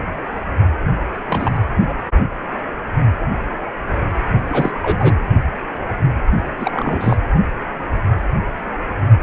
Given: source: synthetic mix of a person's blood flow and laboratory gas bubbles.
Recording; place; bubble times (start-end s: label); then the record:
Doppler ultrasound of blood flow; precordium
1.27-1.60 s: bubbles
1.89-1.93 s: bubbles
4.49-4.71 s: bubbles
4.82-5.17 s: bubbles
6.60-7.17 s: bubbles
From the record:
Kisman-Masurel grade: 222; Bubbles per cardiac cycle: several, 3 to 8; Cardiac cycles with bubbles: 10 to 50%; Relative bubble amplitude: moderate (0.250 to 0.450); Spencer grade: 2 (many but less than half of the cardiac periods contain bubble signals, singularly or in groups); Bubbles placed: only in the low amplitude regions of the cardiac cycle